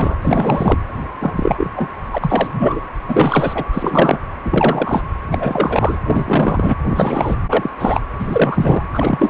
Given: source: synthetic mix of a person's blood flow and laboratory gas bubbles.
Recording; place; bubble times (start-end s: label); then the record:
Doppler ultrasound of blood flow; precordium
0.00-0.16 s: bubbles
0.22-0.78 s: bubbles
1.20-1.72 s: bubbles
1.76-1.90 s: bubbles
2.11-2.81 s: bubbles
3.08-3.65 s: bubbles
3.73-4.19 s: bubbles
4.45-5.04 s: bubbles
5.31-6.00 s: bubbles
6.08-6.77 s: bubbles
6.85-7.36 s: bubbles
7.48-7.70 s: bubbles
7.79-8.02 s: bubbles
8.19-8.85 s: bubbles
8.94-9.29 s: bubbles
From the record:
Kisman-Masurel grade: 343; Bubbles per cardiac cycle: rolling drumbeat, 9 or more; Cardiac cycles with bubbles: 100%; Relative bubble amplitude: loud (0.450 to 0.775); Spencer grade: 3 (all of the cardiac periods contain showers or single bubble signals, but not dominating or overriding the cardiac motion signals); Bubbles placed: anywhere in the cardiac cycle